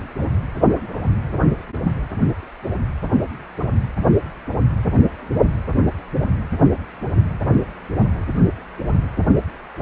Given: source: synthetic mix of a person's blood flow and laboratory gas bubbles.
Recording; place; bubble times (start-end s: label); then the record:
Doppler ultrasound of blood flow; precordium
0.00-0.03 s: bubbles
From the record:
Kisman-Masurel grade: 113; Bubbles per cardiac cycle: 1 to 2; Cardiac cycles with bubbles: 1 to 10%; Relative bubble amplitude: loud (0.450 to 0.775); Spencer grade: 1 (occasional bubble signal discernible with the cardiac motion signal, with majority of cardiac periods free of bubbles); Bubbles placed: anywhere in the cardiac cycle